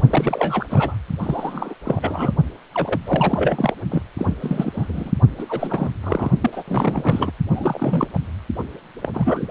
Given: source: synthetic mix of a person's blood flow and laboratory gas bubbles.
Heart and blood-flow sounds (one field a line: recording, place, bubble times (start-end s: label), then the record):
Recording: Doppler ultrasound of blood flow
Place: precordium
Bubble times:
0.10-0.66 s: bubbles
0.70-0.96 s: bubbles
1.19-1.75 s: bubbles
1.84-2.31 s: bubbles
2.74-3.00 s: bubbles
3.06-3.74 s: bubbles
3.89-4.03 s: bubbles
4.17-4.34 s: bubbles
4.40-5.12 s: bubbles
5.38-5.91 s: bubbles
6.03-6.31 s: bubbles
6.41-6.62 s: bubbles
6.67-7.33 s: bubbles
7.50-8.07 s: bubbles
8.13-8.18 s: bubbles
8.58-8.64 s: bubbles
9.01-9.46 s: bubbles
From the record:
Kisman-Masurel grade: 342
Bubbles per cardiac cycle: rolling drumbeat, 9 or more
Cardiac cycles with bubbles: 100%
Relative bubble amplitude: moderate (0.250 to 0.450)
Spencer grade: 3 (all of the cardiac periods contain showers or single bubble signals, but not dominating or overriding the cardiac motion signals)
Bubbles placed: only in the low amplitude regions of the cardiac cycle